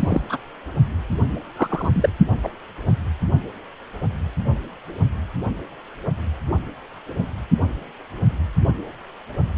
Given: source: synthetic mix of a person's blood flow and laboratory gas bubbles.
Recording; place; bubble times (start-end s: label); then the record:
Doppler ultrasound of blood flow; precordium
0.00-0.22 s: bubbles
0.29-0.37 s: bubbles
1.56-2.09 s: bubbles
2.42-2.49 s: bubbles
From the record:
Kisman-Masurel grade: 123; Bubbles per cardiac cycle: 1 to 2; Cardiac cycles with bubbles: 10 to 50%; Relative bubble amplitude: loud (0.450 to 0.775); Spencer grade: 2 (many but less than half of the cardiac periods contain bubble signals, singularly or in groups); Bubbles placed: only in the low amplitude regions of the cardiac cycle